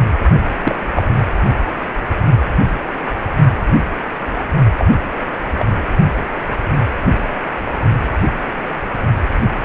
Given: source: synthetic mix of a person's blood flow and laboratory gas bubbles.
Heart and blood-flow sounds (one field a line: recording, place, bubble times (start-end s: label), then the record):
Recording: Doppler ultrasound of blood flow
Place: precordium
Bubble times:
0.61-0.75 s: bubbles
0.95-1.03 s: bubbles
4.38-4.44 s: bubbles
4.79-4.88 s: bubbles
5.58-5.64 s: bubbles
From the record:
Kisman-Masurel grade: 123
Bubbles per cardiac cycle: 1 to 2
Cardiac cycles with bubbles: 10 to 50%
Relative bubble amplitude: loud (0.450 to 0.775)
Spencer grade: 2 (many but less than half of the cardiac periods contain bubble signals, singularly or in groups)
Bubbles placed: only in the low amplitude regions of the cardiac cycle